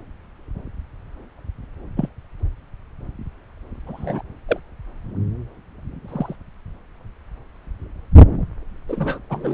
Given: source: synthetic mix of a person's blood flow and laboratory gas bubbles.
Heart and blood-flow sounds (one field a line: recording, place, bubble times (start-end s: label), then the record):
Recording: Doppler ultrasound of blood flow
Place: subclavian vein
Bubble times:
1.96-2.09 s: bubbles
3.87-4.22 s: bubbles
4.49-4.60 s: bubbles
6.08-6.36 s: bubbles
8.88-9.19 s: bubbles
9.29-9.54 s: bubbles
From the record:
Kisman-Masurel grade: 122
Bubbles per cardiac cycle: 1 to 2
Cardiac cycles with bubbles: 10 to 50%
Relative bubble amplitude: moderate (0.250 to 0.450)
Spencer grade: 2 (many but less than half of the cardiac periods contain bubble signals, singularly or in groups)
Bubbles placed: anywhere in the cardiac cycle